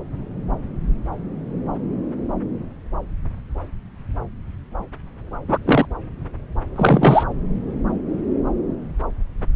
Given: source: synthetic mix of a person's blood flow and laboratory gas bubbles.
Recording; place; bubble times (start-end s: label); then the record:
Doppler ultrasound of blood flow; subclavian vein
5.48-5.58 s: bubbles
5.65-5.85 s: bubbles
6.76-7.23 s: bubbles
From the record:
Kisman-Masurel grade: 213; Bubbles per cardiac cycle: several, 3 to 8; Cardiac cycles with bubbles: 1 to 10%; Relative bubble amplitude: loud (0.450 to 0.775); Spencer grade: 1 (occasional bubble signal discernible with the cardiac motion signal, with majority of cardiac periods free of bubbles); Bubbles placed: anywhere in the cardiac cycle